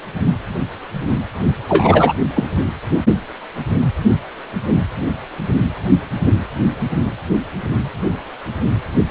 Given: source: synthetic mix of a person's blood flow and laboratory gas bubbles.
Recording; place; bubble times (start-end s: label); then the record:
Doppler ultrasound of blood flow; precordium
1.69-2.14 s: bubbles
2.36-2.51 s: bubbles
From the record:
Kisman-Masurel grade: 213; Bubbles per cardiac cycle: several, 3 to 8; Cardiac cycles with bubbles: 1 to 10%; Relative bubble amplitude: loud (0.450 to 0.775); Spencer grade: 1 (occasional bubble signal discernible with the cardiac motion signal, with majority of cardiac periods free of bubbles); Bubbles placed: anywhere in the cardiac cycle